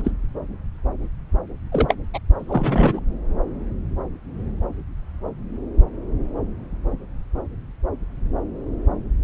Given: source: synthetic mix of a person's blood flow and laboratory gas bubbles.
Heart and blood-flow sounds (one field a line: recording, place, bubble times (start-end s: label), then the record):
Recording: Doppler ultrasound of blood flow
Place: subclavian vein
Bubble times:
0.00-0.11 s: bubbles
1.71-1.94 s: bubbles
2.14-2.19 s: bubbles
2.40-3.00 s: bubbles
From the record:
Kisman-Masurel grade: 222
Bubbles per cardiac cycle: several, 3 to 8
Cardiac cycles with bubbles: 10 to 50%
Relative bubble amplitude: moderate (0.250 to 0.450)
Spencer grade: 2 (many but less than half of the cardiac periods contain bubble signals, singularly or in groups)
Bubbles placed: anywhere in the cardiac cycle